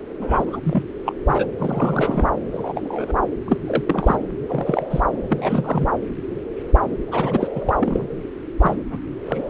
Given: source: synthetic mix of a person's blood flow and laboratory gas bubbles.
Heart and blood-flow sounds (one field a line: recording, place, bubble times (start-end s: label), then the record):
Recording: Doppler ultrasound of blood flow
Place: subclavian vein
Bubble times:
0.19-0.59 s: bubbles
0.63-0.83 s: bubbles
1.05-1.13 s: bubbles
1.26-1.46 s: bubbles
1.59-2.29 s: bubbles
2.51-3.12 s: bubbles
3.46-3.58 s: bubbles
3.67-3.83 s: bubbles
3.88-4.26 s: bubbles
4.47-4.86 s: bubbles
4.89-5.00 s: bubbles
5.29-5.87 s: bubbles
7.08-7.47 s: bubbles
7.55-7.73 s: bubbles
7.80-8.04 s: bubbles
8.59-8.77 s: bubbles
8.90-8.98 s: bubbles
9.26-9.49 s: bubbles
From the record:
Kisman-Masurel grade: 242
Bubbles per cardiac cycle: several, 3 to 8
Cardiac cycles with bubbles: 100%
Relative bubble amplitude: moderate (0.250 to 0.450)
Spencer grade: 3 (all of the cardiac periods contain showers or single bubble signals, but not dominating or overriding the cardiac motion signals)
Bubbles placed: anywhere in the cardiac cycle